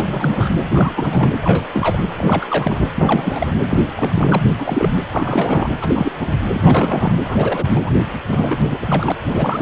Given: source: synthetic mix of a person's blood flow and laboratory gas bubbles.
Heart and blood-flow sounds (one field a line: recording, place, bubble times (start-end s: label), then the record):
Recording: Doppler ultrasound of blood flow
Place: precordium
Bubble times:
0.00-0.50 s: bubbles
0.70-1.34 s: bubbles
1.42-1.67 s: bubbles
1.74-2.04 s: bubbles
2.17-2.89 s: bubbles
2.95-3.52 s: bubbles
3.65-3.90 s: bubbles
3.96-4.42 s: bubbles
4.45-4.49 s: bubbles
4.58-4.92 s: bubbles
5.11-5.70 s: bubbles
5.80-6.12 s: bubbles
6.19-6.41 s: bubbles
6.49-7.15 s: bubbles
7.24-7.95 s: bubbles
8.28-8.57 s: bubbles
8.63-8.78 s: bubbles
8.81-9.12 s: bubbles
9.25-9.62 s: bubbles
From the record:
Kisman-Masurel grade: 342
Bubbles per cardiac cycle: rolling drumbeat, 9 or more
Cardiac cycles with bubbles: 100%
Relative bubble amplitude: moderate (0.250 to 0.450)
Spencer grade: 3 (all of the cardiac periods contain showers or single bubble signals, but not dominating or overriding the cardiac motion signals)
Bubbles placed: anywhere in the cardiac cycle